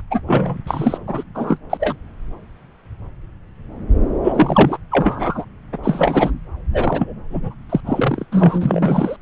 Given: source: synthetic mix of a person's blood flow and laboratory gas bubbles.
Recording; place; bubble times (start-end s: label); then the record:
Doppler ultrasound of blood flow; subclavian vein
0.11-0.20 s: bubbles
0.27-0.57 s: bubbles
0.67-0.98 s: bubbles
1.07-1.24 s: bubbles
1.34-1.59 s: bubbles
1.70-1.96 s: bubbles
4.23-4.78 s: bubbles
4.91-5.45 s: bubbles
5.72-5.77 s: bubbles
5.83-6.31 s: bubbles
6.73-7.14 s: bubbles
7.30-7.54 s: bubbles
7.69-7.80 s: bubbles
7.86-8.25 s: bubbles
8.31-9.16 s: bubbles
From the record:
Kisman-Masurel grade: 333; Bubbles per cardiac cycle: rolling drumbeat, 9 or more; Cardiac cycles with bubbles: 50 to 99%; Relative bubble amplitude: loud (0.450 to 0.775); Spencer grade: 3 (all of the cardiac periods contain showers or single bubble signals, but not dominating or overriding the cardiac motion signals); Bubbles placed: anywhere in the cardiac cycle